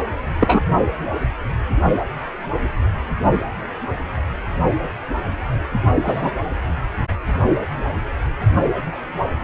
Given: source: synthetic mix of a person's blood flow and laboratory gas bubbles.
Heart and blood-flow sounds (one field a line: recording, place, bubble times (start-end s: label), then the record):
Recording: Doppler ultrasound of blood flow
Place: precordium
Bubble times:
0.40-0.60 s: bubbles
6.04-6.32 s: bubbles
From the record:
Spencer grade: 2 (many but less than half of the cardiac periods contain bubble signals, singularly or in groups)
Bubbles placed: only in the low amplitude regions of the cardiac cycle